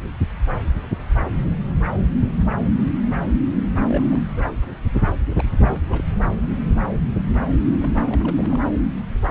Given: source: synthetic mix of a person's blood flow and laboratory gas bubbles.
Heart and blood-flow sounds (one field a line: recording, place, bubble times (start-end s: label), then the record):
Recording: Doppler ultrasound of blood flow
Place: subclavian vein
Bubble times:
3.87-4.19 s: bubbles
4.28-4.47 s: bubbles
5.37-5.44 s: bubbles
5.61-6.02 s: bubbles
7.80-7.94 s: bubbles
8.08-8.61 s: bubbles
From the record:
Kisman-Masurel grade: 221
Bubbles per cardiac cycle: several, 3 to 8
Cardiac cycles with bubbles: 10 to 50%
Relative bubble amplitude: barely perceptible (0.100 to 0.250)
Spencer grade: 2 (many but less than half of the cardiac periods contain bubble signals, singularly or in groups)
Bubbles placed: anywhere in the cardiac cycle